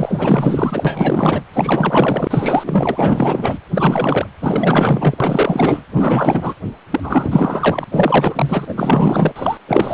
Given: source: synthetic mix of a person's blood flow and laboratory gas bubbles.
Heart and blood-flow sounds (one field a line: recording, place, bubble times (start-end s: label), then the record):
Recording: Doppler ultrasound of blood flow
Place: precordium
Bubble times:
0.00-1.41 s: bubbles
1.53-3.58 s: bubbles
3.73-4.27 s: bubbles
4.41-5.18 s: bubbles
5.20-5.81 s: bubbles
5.94-6.55 s: bubbles
6.90-7.00 s: bubbles
7.03-7.85 s: bubbles
7.92-8.65 s: bubbles
8.68-9.32 s: bubbles
9.35-9.57 s: bubbles
9.67-9.94 s: bubbles
From the record:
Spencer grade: 4 (maximum detectable bubble signal sounding continuously throughout systole and diastole of every cardiac period, and overriding the amplitude of the normal cardiac signals)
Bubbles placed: anywhere in the cardiac cycle